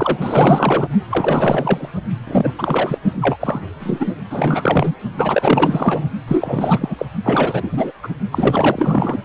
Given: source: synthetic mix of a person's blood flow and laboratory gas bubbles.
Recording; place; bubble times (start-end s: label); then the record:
Doppler ultrasound of blood flow; precordium
0.00-0.88 s: bubbles
1.10-1.90 s: bubbles
2.27-2.53 s: bubbles
2.58-2.98 s: bubbles
3.21-3.36 s: bubbles
3.40-3.67 s: bubbles
3.80-4.09 s: bubbles
4.30-4.95 s: bubbles
5.17-6.10 s: bubbles
6.28-6.96 s: bubbles
6.99-7.06 s: bubbles
7.24-7.92 s: bubbles
8.03-8.08 s: bubbles
8.31-9.18 s: bubbles
From the record:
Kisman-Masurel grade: 444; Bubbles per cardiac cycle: continuous sound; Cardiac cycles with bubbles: 100%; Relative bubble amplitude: maximal (0.775 to 0.999); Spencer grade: 4 (maximum detectable bubble signal sounding continuously throughout systole and diastole of every cardiac period, and overriding the amplitude of the normal cardiac signals); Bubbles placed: only in the low amplitude regions of the cardiac cycle